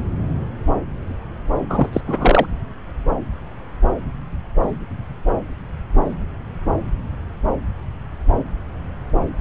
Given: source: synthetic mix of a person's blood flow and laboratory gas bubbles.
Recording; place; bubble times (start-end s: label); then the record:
Doppler ultrasound of blood flow; subclavian vein
1.69-1.90 s: bubbles
1.92-2.01 s: bubbles
2.07-2.46 s: bubbles
From the record:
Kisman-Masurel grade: 213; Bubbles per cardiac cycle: several, 3 to 8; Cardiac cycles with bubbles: 1 to 10%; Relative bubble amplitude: loud (0.450 to 0.775); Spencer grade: 1 (occasional bubble signal discernible with the cardiac motion signal, with majority of cardiac periods free of bubbles); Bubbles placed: anywhere in the cardiac cycle